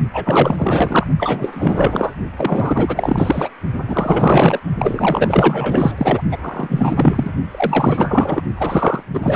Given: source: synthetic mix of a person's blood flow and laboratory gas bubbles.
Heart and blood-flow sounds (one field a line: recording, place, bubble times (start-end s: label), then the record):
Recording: Doppler ultrasound of blood flow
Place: precordium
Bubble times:
0.13-1.07 s: bubbles
1.18-2.15 s: bubbles
2.37-3.50 s: bubbles
3.88-4.59 s: bubbles
4.78-6.22 s: bubbles
6.32-6.38 s: bubbles
6.42-7.30 s: bubbles
7.51-8.42 s: bubbles
8.56-9.04 s: bubbles
9.13-9.36 s: bubbles
From the record:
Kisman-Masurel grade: 444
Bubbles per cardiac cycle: continuous sound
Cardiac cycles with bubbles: 100%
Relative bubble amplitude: maximal (0.775 to 0.999)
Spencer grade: 4 (maximum detectable bubble signal sounding continuously throughout systole and diastole of every cardiac period, and overriding the amplitude of the normal cardiac signals)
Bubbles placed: only in the low amplitude regions of the cardiac cycle